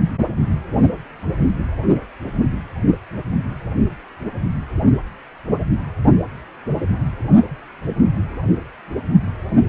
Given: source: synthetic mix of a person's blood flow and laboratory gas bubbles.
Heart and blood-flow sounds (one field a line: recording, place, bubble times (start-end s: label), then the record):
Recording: Doppler ultrasound of blood flow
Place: precordium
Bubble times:
no bubbles
From the record:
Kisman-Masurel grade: 000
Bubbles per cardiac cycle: 0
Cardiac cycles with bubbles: 0%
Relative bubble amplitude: no bubbles discernible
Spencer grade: 0 (complete lack of bubble signals)